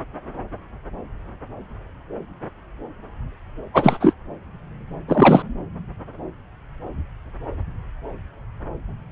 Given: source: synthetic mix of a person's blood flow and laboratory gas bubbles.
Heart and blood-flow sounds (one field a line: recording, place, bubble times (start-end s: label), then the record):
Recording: Doppler ultrasound of blood flow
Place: subclavian vein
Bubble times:
3.73-4.14 s: bubbles
5.08-5.43 s: bubbles
From the record:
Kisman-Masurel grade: 223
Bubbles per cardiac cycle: several, 3 to 8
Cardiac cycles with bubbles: 10 to 50%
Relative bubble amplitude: loud (0.450 to 0.775)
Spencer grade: 2 (many but less than half of the cardiac periods contain bubble signals, singularly or in groups)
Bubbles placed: anywhere in the cardiac cycle